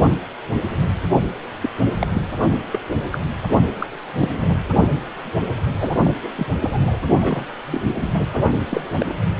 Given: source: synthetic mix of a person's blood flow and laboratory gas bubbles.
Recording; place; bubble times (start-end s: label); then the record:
Doppler ultrasound of blood flow; precordium
1.62-1.69 s: bubbles
1.99-2.07 s: bubbles
2.13-2.21 s: bubbles
2.50-2.55 s: bubbles
2.72-2.79 s: bubbles
3.11-3.18 s: bubbles
3.79-3.87 s: bubbles
4.18-4.37 s: bubbles
4.41-4.54 s: bubbles
5.80-5.96 s: bubbles
6.04-6.11 s: bubbles
6.22-6.29 s: bubbles
6.35-6.46 s: bubbles
6.58-6.99 s: bubbles
7.20-7.46 s: bubbles
7.71-7.81 s: bubbles
8.01-8.08 s: bubbles
8.13-8.26 s: bubbles
8.32-8.53 s: bubbles
8.70-8.81 s: bubbles
8.98-9.14 s: bubbles
From the record:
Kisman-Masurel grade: 232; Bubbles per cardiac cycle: several, 3 to 8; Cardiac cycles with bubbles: 50 to 99%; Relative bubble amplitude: moderate (0.250 to 0.450); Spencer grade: 3 (all of the cardiac periods contain showers or single bubble signals, but not dominating or overriding the cardiac motion signals); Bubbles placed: anywhere in the cardiac cycle